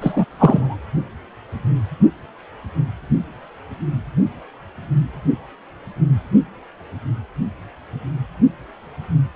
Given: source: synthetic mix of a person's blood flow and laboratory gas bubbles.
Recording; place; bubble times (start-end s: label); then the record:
Doppler ultrasound of blood flow; precordium
0.00-0.25 s: bubbles
0.39-0.77 s: bubbles
From the record:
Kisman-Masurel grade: 213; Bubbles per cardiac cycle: several, 3 to 8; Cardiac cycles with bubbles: 1 to 10%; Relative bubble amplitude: loud (0.450 to 0.775); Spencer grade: 1 (occasional bubble signal discernible with the cardiac motion signal, with majority of cardiac periods free of bubbles); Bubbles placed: anywhere in the cardiac cycle